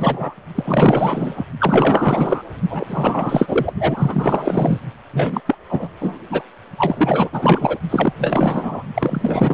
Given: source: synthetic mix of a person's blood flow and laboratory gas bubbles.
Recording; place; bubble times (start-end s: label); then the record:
Doppler ultrasound of blood flow; precordium
0.00-0.36 s: bubbles
0.55-1.45 s: bubbles
1.59-2.42 s: bubbles
2.69-3.73 s: bubbles
3.79-4.79 s: bubbles
5.13-5.41 s: bubbles
5.46-5.55 s: bubbles
5.68-5.89 s: bubbles
6.00-6.18 s: bubbles
6.29-6.44 s: bubbles
6.78-7.79 s: bubbles
7.89-8.13 s: bubbles
8.18-8.83 s: bubbles
8.94-9.54 s: bubbles
From the record:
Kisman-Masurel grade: 444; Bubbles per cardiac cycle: continuous sound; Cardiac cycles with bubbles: 100%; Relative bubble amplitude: maximal (0.775 to 0.999); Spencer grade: 4 (maximum detectable bubble signal sounding continuously throughout systole and diastole of every cardiac period, and overriding the amplitude of the normal cardiac signals); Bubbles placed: only in the low amplitude regions of the cardiac cycle